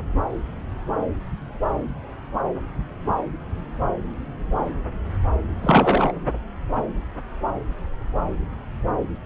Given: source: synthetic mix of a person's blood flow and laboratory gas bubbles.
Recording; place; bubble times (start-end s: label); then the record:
Doppler ultrasound of blood flow; subclavian vein
5.62-6.12 s: bubbles
From the record:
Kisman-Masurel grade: 113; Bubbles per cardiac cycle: 1 to 2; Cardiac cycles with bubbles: 1 to 10%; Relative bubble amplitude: loud (0.450 to 0.775); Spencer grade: 1 (occasional bubble signal discernible with the cardiac motion signal, with majority of cardiac periods free of bubbles); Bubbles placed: anywhere in the cardiac cycle